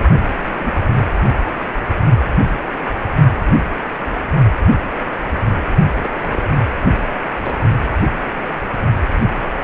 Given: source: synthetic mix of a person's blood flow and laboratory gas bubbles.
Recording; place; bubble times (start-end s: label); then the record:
Doppler ultrasound of blood flow; precordium
0.20-0.76 s: bubbles
0.93-1.10 s: bubbles
6.01-6.12 s: bubbles
6.21-6.55 s: bubbles
7.42-7.52 s: bubbles
From the record:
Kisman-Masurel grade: 221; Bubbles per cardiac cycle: several, 3 to 8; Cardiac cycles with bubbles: 10 to 50%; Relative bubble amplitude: barely perceptible (0.100 to 0.250); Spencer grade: 2 (many but less than half of the cardiac periods contain bubble signals, singularly or in groups); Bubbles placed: only in the low amplitude regions of the cardiac cycle